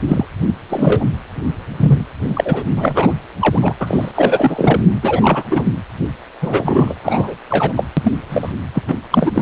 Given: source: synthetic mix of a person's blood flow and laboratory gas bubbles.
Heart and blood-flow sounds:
Doppler ultrasound of blood flow; precordium
0.08-0.25 s: bubbles
0.70-1.05 s: bubbles
1.79-2.06 s: bubbles
2.33-2.65 s: bubbles
2.77-3.13 s: bubbles
3.41-3.75 s: bubbles
3.80-4.11 s: bubbles
4.14-4.81 s: bubbles
5.02-5.47 s: bubbles
5.50-5.65 s: bubbles
6.42-6.94 s: bubbles
7.03-7.34 s: bubbles
7.50-7.74 s: bubbles
7.76-7.85 s: bubbles
7.96-8.13 s: bubbles
8.29-8.53 s: bubbles
8.74-8.84 s: bubbles
8.88-8.96 s: bubbles
9.11-9.42 s: bubbles
From the record:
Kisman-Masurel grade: 243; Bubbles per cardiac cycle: several, 3 to 8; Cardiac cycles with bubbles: 100%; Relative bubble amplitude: loud (0.450 to 0.775); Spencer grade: 3 (all of the cardiac periods contain showers or single bubble signals, but not dominating or overriding the cardiac motion signals); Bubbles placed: anywhere in the cardiac cycle

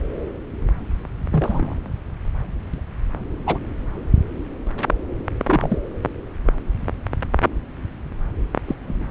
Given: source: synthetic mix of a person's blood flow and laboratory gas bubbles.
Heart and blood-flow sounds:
Doppler ultrasound of blood flow; subclavian vein
1.29-1.77 s: bubbles
2.74-2.80 s: bubbles
3.46-3.58 s: bubbles
5.46-5.81 s: bubbles
8.66-8.75 s: bubbles
8.87-9.07 s: bubbles
From the record:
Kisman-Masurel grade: 122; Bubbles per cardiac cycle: 1 to 2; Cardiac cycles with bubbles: 10 to 50%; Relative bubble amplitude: moderate (0.250 to 0.450); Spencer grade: 2 (many but less than half of the cardiac periods contain bubble signals, singularly or in groups); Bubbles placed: anywhere in the cardiac cycle

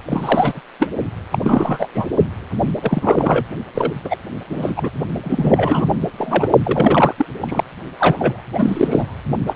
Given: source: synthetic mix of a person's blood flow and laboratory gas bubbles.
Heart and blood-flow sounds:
Doppler ultrasound of blood flow; precordium
0.05-0.60 s: bubbles
0.79-0.91 s: bubbles
1.30-1.39 s: bubbles
1.44-1.89 s: bubbles
1.94-2.07 s: bubbles
2.82-3.46 s: bubbles
3.75-3.92 s: bubbles
4.04-4.17 s: bubbles
4.50-4.90 s: bubbles
5.22-5.92 s: bubbles
6.18-6.48 s: bubbles
6.64-7.26 s: bubbles
7.40-7.64 s: bubbles
7.98-8.42 s: bubbles
8.54-9.15 s: bubbles
9.46-9.54 s: bubbles
From the record:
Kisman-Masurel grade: 343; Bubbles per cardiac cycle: rolling drumbeat, 9 or more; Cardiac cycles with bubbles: 100%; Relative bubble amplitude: loud (0.450 to 0.775); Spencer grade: 3 (all of the cardiac periods contain showers or single bubble signals, but not dominating or overriding the cardiac motion signals); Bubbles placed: only in the low amplitude regions of the cardiac cycle

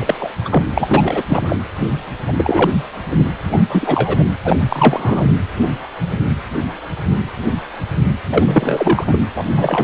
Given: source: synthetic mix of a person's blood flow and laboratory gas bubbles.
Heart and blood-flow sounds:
Doppler ultrasound of blood flow; precordium
0.00-0.15 s: bubbles
0.20-0.29 s: bubbles
0.45-0.63 s: bubbles
0.71-1.22 s: bubbles
1.27-1.58 s: bubbles
2.27-2.32 s: bubbles
2.36-2.70 s: bubbles
3.09-3.27 s: bubbles
3.52-3.59 s: bubbles
3.70-4.24 s: bubbles
4.45-4.61 s: bubbles
4.68-5.32 s: bubbles
8.32-9.22 s: bubbles
9.35-9.44 s: bubbles
9.56-9.84 s: bubbles
From the record:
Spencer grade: 3 (all of the cardiac periods contain showers or single bubble signals, but not dominating or overriding the cardiac motion signals); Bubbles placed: anywhere in the cardiac cycle

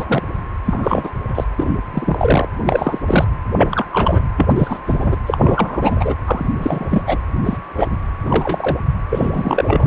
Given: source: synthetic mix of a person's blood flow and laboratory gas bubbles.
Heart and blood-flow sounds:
Doppler ultrasound of blood flow; precordium
0.00-0.23 s: bubbles
0.66-1.10 s: bubbles
1.28-1.44 s: bubbles
1.56-1.72 s: bubbles
1.94-2.48 s: bubbles
2.67-2.98 s: bubbles
3.06-3.25 s: bubbles
3.57-3.85 s: bubbles
3.93-4.29 s: bubbles
4.38-4.79 s: bubbles
4.87-5.16 s: bubbles
5.26-5.38 s: bubbles
5.40-6.15 s: bubbles
6.26-6.45 s: bubbles
6.58-7.03 s: bubbles
7.07-7.19 s: bubbles
7.45-7.57 s: bubbles
7.76-7.88 s: bubbles
7.91-7.98 s: bubbles
8.26-8.78 s: bubbles
9.10-9.87 s: bubbles
From the record:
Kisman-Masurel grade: 243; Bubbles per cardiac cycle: several, 3 to 8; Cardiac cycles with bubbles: 100%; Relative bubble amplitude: loud (0.450 to 0.775); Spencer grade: 3 (all of the cardiac periods contain showers or single bubble signals, but not dominating or overriding the cardiac motion signals); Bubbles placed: anywhere in the cardiac cycle

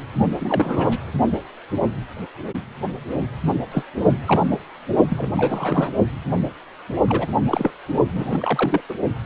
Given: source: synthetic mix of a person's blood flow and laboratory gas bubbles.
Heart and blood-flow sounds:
Doppler ultrasound of blood flow; precordium
0.38-0.97 s: bubbles
3.71-3.83 s: bubbles
4.25-4.42 s: bubbles
4.51-4.58 s: bubbles
5.09-5.31 s: bubbles
5.36-5.93 s: bubbles
7.08-7.27 s: bubbles
7.47-7.71 s: bubbles
8.13-8.81 s: bubbles
8.89-8.95 s: bubbles
From the record:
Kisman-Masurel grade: 222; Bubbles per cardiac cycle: several, 3 to 8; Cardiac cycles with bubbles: 10 to 50%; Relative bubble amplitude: moderate (0.250 to 0.450); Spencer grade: 2 (many but less than half of the cardiac periods contain bubble signals, singularly or in groups); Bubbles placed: only in the low amplitude regions of the cardiac cycle

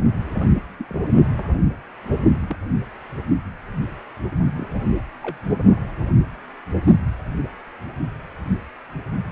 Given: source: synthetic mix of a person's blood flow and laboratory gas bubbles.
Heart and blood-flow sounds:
Doppler ultrasound of blood flow; precordium
0.79-0.85 s: bubbles
0.90-1.03 s: bubbles
1.38-1.48 s: bubbles
2.46-2.58 s: bubbles
4.56-4.68 s: bubbles
5.22-5.41 s: bubbles
From the record:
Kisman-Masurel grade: 121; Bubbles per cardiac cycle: 1 to 2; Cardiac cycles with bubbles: 10 to 50%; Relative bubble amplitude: barely perceptible (0.100 to 0.250); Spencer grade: 2 (many but less than half of the cardiac periods contain bubble signals, singularly or in groups); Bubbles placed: only in the low amplitude regions of the cardiac cycle

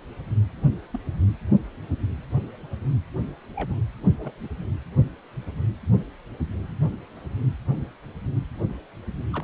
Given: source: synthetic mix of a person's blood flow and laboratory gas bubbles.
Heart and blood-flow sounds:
Doppler ultrasound of blood flow; precordium
0.93-0.98 s: bubbles
3.56-3.74 s: bubbles
4.19-4.32 s: bubbles
4.43-4.48 s: bubbles
9.32-9.44 s: bubbles
From the record:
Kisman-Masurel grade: 121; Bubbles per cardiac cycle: 1 to 2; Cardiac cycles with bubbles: 10 to 50%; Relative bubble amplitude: barely perceptible (0.100 to 0.250); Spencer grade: 2 (many but less than half of the cardiac periods contain bubble signals, singularly or in groups); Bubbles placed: only in the low amplitude regions of the cardiac cycle

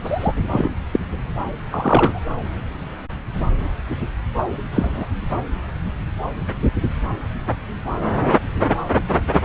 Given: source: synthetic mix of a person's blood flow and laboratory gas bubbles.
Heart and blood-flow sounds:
Doppler ultrasound of blood flow; subclavian vein
0.03-0.32 s: bubbles
0.51-0.69 s: bubbles
0.92-0.99 s: bubbles
1.70-2.24 s: bubbles
4.71-5.06 s: bubbles
From the record:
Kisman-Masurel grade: 123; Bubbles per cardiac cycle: 1 to 2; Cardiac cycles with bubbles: 10 to 50%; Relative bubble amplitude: loud (0.450 to 0.775); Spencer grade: 2 (many but less than half of the cardiac periods contain bubble signals, singularly or in groups); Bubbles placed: anywhere in the cardiac cycle

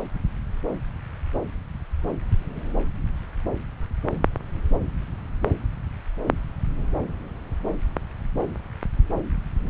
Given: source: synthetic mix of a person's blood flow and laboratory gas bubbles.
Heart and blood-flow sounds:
Doppler ultrasound of blood flow; subclavian vein
no bubbles
From the record:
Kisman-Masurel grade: 000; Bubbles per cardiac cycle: 0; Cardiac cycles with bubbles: 0%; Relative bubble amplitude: no bubbles discernible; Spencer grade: 0 (complete lack of bubble signals)

